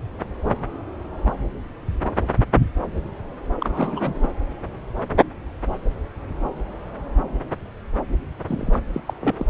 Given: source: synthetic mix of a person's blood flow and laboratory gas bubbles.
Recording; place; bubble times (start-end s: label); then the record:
Doppler ultrasound of blood flow; subclavian vein
3.58-4.28 s: bubbles
8.48-8.79 s: bubbles
8.93-9.02 s: bubbles
9.06-9.14 s: bubbles
9.21-9.35 s: bubbles
9.38-9.45 s: bubbles
From the record:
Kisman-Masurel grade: 222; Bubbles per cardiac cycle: several, 3 to 8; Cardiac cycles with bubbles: 10 to 50%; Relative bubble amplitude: moderate (0.250 to 0.450); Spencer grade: 2 (many but less than half of the cardiac periods contain bubble signals, singularly or in groups); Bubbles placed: anywhere in the cardiac cycle